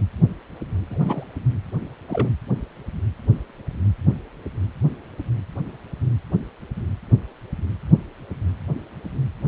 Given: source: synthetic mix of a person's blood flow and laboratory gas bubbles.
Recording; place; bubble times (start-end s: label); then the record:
Doppler ultrasound of blood flow; precordium
0.90-1.24 s: bubbles
2.08-2.29 s: bubbles
From the record:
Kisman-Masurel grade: 122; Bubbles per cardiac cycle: 1 to 2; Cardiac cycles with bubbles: 10 to 50%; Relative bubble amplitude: moderate (0.250 to 0.450); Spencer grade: 2 (many but less than half of the cardiac periods contain bubble signals, singularly or in groups); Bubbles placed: anywhere in the cardiac cycle